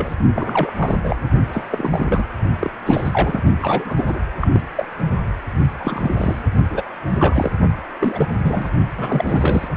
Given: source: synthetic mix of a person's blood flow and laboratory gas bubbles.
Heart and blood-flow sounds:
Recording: Doppler ultrasound of blood flow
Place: precordium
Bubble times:
0.00-0.15 s: bubbles
0.35-0.71 s: bubbles
0.77-0.96 s: bubbles
1.03-1.16 s: bubbles
1.21-1.29 s: bubbles
1.52-1.65 s: bubbles
1.72-2.25 s: bubbles
2.60-2.71 s: bubbles
2.86-3.42 s: bubbles
3.62-4.20 s: bubbles
4.40-4.48 s: bubbles
4.53-4.61 s: bubbles
4.75-4.85 s: bubbles
5.79-6.42 s: bubbles
6.70-6.83 s: bubbles
7.10-7.51 s: bubbles
8.00-8.26 s: bubbles
8.29-8.70 s: bubbles
8.97-9.68 s: bubbles
From the record:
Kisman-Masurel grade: 332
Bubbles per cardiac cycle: rolling drumbeat, 9 or more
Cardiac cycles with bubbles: 50 to 99%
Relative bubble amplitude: moderate (0.250 to 0.450)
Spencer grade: 3 (all of the cardiac periods contain showers or single bubble signals, but not dominating or overriding the cardiac motion signals)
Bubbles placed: only in the low amplitude regions of the cardiac cycle

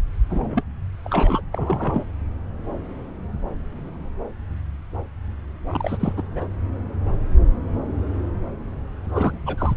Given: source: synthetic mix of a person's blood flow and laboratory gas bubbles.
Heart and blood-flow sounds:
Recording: Doppler ultrasound of blood flow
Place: subclavian vein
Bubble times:
0.30-0.63 s: bubbles
1.04-1.41 s: bubbles
1.52-2.04 s: bubbles
5.68-6.13 s: bubbles
6.17-6.23 s: bubbles
6.36-6.46 s: bubbles
9.04-9.38 s: bubbles
9.46-9.74 s: bubbles
From the record:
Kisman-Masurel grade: 222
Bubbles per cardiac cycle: several, 3 to 8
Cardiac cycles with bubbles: 10 to 50%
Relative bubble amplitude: moderate (0.250 to 0.450)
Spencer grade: 2 (many but less than half of the cardiac periods contain bubble signals, singularly or in groups)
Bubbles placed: anywhere in the cardiac cycle

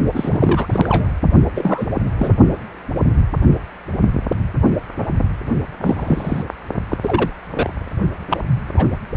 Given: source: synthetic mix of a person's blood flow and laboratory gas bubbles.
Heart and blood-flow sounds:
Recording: Doppler ultrasound of blood flow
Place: precordium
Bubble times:
0.14-1.08 s: bubbles
1.55-1.93 s: bubbles
2.18-2.33 s: bubbles
5.82-6.43 s: bubbles
6.89-6.97 s: bubbles
7.02-7.29 s: bubbles
7.55-7.71 s: bubbles
8.30-8.38 s: bubbles
8.77-8.86 s: bubbles
From the record:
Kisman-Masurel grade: 232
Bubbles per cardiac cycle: several, 3 to 8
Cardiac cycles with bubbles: 50 to 99%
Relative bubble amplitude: moderate (0.250 to 0.450)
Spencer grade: 3 (all of the cardiac periods contain showers or single bubble signals, but not dominating or overriding the cardiac motion signals)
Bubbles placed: only in the low amplitude regions of the cardiac cycle

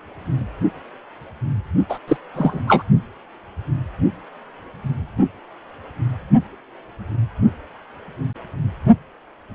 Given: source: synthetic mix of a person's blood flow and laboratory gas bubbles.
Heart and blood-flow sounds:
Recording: Doppler ultrasound of blood flow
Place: precordium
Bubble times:
1.89-1.98 s: bubbles
2.08-2.17 s: bubbles
2.33-2.61 s: bubbles
2.67-2.83 s: bubbles
From the record:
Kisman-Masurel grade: 213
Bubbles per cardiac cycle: several, 3 to 8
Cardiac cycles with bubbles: 1 to 10%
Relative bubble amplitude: loud (0.450 to 0.775)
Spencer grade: 1 (occasional bubble signal discernible with the cardiac motion signal, with majority of cardiac periods free of bubbles)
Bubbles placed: only in the low amplitude regions of the cardiac cycle

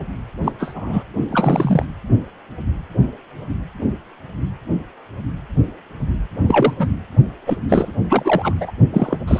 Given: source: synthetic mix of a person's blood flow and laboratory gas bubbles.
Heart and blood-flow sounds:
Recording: Doppler ultrasound of blood flow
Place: precordium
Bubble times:
0.44-0.52 s: bubbles
0.58-1.03 s: bubbles
1.31-1.85 s: bubbles
6.48-6.74 s: bubbles
6.79-6.87 s: bubbles
7.46-7.57 s: bubbles
7.68-7.92 s: bubbles
8.08-8.71 s: bubbles
8.93-9.17 s: bubbles
9.27-9.40 s: bubbles
From the record:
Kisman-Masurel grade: 233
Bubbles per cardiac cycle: several, 3 to 8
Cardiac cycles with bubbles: 50 to 99%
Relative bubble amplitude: loud (0.450 to 0.775)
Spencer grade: 3 (all of the cardiac periods contain showers or single bubble signals, but not dominating or overriding the cardiac motion signals)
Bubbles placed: only in the low amplitude regions of the cardiac cycle

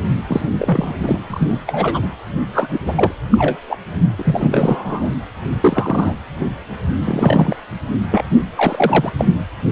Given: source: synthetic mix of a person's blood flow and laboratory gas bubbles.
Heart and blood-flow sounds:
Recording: Doppler ultrasound of blood flow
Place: precordium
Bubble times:
0.28-0.53 s: bubbles
0.58-0.93 s: bubbles
1.02-1.21 s: bubbles
1.30-1.58 s: bubbles
1.67-2.08 s: bubbles
2.52-3.12 s: bubbles
3.31-3.56 s: bubbles
3.68-3.77 s: bubbles
4.18-5.09 s: bubbles
5.61-6.14 s: bubbles
6.40-6.49 s: bubbles
7.07-7.56 s: bubbles
8.09-8.22 s: bubbles
8.56-9.10 s: bubbles
9.17-9.25 s: bubbles
9.70-9.72 s: bubbles
From the record:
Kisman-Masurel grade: 243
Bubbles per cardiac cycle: several, 3 to 8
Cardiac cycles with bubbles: 100%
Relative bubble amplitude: loud (0.450 to 0.775)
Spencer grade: 3 (all of the cardiac periods contain showers or single bubble signals, but not dominating or overriding the cardiac motion signals)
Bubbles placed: anywhere in the cardiac cycle

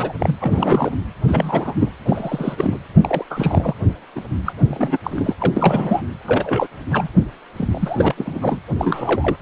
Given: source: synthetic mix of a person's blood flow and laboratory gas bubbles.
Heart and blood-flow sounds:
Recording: Doppler ultrasound of blood flow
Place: precordium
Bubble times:
0.00-0.12 s: bubbles
0.18-0.35 s: bubbles
0.41-0.95 s: bubbles
1.27-1.90 s: bubbles
2.05-2.77 s: bubbles
3.01-3.25 s: bubbles
3.30-3.74 s: bubbles
4.16-4.21 s: bubbles
4.45-4.53 s: bubbles
4.66-4.97 s: bubbles
5.04-5.34 s: bubbles
5.39-5.53 s: bubbles
5.56-6.02 s: bubbles
6.26-6.67 s: bubbles
6.90-7.08 s: bubbles
7.57-8.14 s: bubbles
8.17-8.59 s: bubbles
8.79-9.37 s: bubbles
From the record:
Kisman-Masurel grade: 342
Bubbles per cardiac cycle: rolling drumbeat, 9 or more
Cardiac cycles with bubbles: 100%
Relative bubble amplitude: moderate (0.250 to 0.450)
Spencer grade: 3 (all of the cardiac periods contain showers or single bubble signals, but not dominating or overriding the cardiac motion signals)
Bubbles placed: anywhere in the cardiac cycle

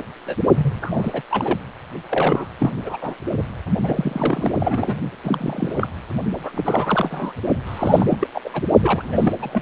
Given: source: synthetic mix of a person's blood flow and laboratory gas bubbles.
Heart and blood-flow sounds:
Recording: Doppler ultrasound of blood flow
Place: precordium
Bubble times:
0.27-0.35 s: bubbles
0.54-1.21 s: bubbles
1.31-1.59 s: bubbles
2.09-2.48 s: bubbles
2.58-2.71 s: bubbles
2.85-2.97 s: bubbles
3.01-3.15 s: bubbles
3.37-3.43 s: bubbles
3.83-4.51 s: bubbles
4.60-4.98 s: bubbles
5.23-5.88 s: bubbles
6.37-6.51 s: bubbles
6.54-7.33 s: bubbles
7.66-8.28 s: bubbles
8.34-8.42 s: bubbles
8.44-8.50 s: bubbles
8.53-8.62 s: bubbles
8.82-9.33 s: bubbles
9.40-9.62 s: bubbles
From the record:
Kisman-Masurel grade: 342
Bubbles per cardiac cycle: rolling drumbeat, 9 or more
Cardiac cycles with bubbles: 100%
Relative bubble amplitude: moderate (0.250 to 0.450)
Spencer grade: 3 (all of the cardiac periods contain showers or single bubble signals, but not dominating or overriding the cardiac motion signals)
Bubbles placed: only in the low amplitude regions of the cardiac cycle

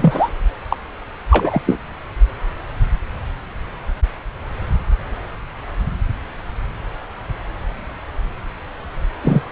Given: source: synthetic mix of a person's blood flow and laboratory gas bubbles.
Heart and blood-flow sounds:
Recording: Doppler ultrasound of blood flow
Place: subclavian vein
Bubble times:
0.00-0.30 s: bubbles
0.70-0.76 s: bubbles
1.30-1.61 s: bubbles
1.66-1.79 s: bubbles
9.22-9.42 s: bubbles
From the record:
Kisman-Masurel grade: 223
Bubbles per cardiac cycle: several, 3 to 8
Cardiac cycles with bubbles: 10 to 50%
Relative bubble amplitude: loud (0.450 to 0.775)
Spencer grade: 2 (many but less than half of the cardiac periods contain bubble signals, singularly or in groups)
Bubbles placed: anywhere in the cardiac cycle

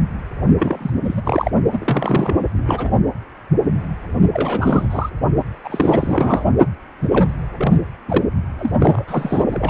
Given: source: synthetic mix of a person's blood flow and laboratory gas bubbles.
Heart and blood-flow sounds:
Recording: Doppler ultrasound of blood flow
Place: precordium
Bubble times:
0.58-0.94 s: bubbles
1.03-1.22 s: bubbles
1.24-1.50 s: bubbles
1.72-2.40 s: bubbles
2.54-2.92 s: bubbles
4.33-5.09 s: bubbles
5.64-6.44 s: bubbles
7.02-7.07 s: bubbles
7.11-7.30 s: bubbles
7.57-7.77 s: bubbles
8.08-8.24 s: bubbles
8.59-8.72 s: bubbles
8.79-9.03 s: bubbles
9.08-9.44 s: bubbles
9.48-9.70 s: bubbles
From the record:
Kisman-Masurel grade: 332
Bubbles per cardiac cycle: rolling drumbeat, 9 or more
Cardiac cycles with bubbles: 50 to 99%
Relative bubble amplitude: moderate (0.250 to 0.450)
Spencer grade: 3 (all of the cardiac periods contain showers or single bubble signals, but not dominating or overriding the cardiac motion signals)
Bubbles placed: only in the low amplitude regions of the cardiac cycle

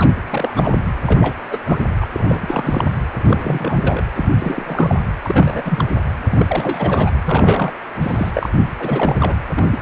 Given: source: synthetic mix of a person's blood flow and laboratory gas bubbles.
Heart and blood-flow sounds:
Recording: Doppler ultrasound of blood flow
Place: precordium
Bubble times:
0.00-0.12 s: bubbles
0.30-0.76 s: bubbles
1.06-1.33 s: bubbles
1.50-1.59 s: bubbles
1.65-1.78 s: bubbles
2.01-2.06 s: bubbles
2.12-2.98 s: bubbles
3.18-4.02 s: bubbles
4.15-4.29 s: bubbles
4.39-5.00 s: bubbles
5.23-5.62 s: bubbles
5.65-5.88 s: bubbles
6.27-7.11 s: bubbles
7.25-7.72 s: bubbles
8.01-8.31 s: bubbles
8.34-8.50 s: bubbles
8.79-9.36 s: bubbles
9.56-9.79 s: bubbles
From the record:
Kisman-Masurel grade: 342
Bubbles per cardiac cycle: rolling drumbeat, 9 or more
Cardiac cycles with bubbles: 100%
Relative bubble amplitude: moderate (0.250 to 0.450)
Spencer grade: 3 (all of the cardiac periods contain showers or single bubble signals, but not dominating or overriding the cardiac motion signals)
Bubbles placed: anywhere in the cardiac cycle

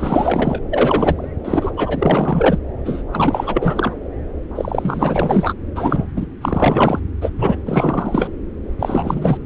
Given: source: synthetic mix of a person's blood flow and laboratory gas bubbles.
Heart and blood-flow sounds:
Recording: Doppler ultrasound of blood flow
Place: subclavian vein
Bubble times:
0.00-0.61 s: bubbles
0.70-1.29 s: bubbles
1.44-1.71 s: bubbles
1.76-2.58 s: bubbles
2.85-3.03 s: bubbles
3.12-3.95 s: bubbles
4.55-5.54 s: bubbles
5.75-6.05 s: bubbles
6.16-6.26 s: bubbles
6.42-7.00 s: bubbles
7.21-7.30 s: bubbles
7.38-7.59 s: bubbles
7.66-8.28 s: bubbles
8.79-9.37 s: bubbles
From the record:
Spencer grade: 4 (maximum detectable bubble signal sounding continuously throughout systole and diastole of every cardiac period, and overriding the amplitude of the normal cardiac signals)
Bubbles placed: anywhere in the cardiac cycle

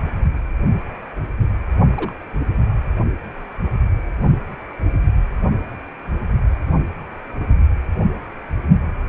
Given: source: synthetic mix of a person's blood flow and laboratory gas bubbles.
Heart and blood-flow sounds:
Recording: Doppler ultrasound of blood flow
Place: precordium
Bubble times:
1.92-2.23 s: bubbles
From the record:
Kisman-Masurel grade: 121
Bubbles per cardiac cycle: 1 to 2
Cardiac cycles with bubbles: 10 to 50%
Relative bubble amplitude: barely perceptible (0.100 to 0.250)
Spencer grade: 2 (many but less than half of the cardiac periods contain bubble signals, singularly or in groups)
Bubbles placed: only in the low amplitude regions of the cardiac cycle

